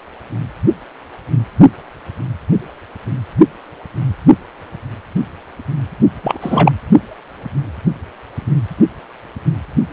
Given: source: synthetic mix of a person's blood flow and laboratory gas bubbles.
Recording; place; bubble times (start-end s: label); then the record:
Doppler ultrasound of blood flow; precordium
6.23-6.72 s: bubbles
From the record:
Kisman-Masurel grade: 213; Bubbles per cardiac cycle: several, 3 to 8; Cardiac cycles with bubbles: 1 to 10%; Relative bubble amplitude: loud (0.450 to 0.775); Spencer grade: 1 (occasional bubble signal discernible with the cardiac motion signal, with majority of cardiac periods free of bubbles); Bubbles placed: only in the low amplitude regions of the cardiac cycle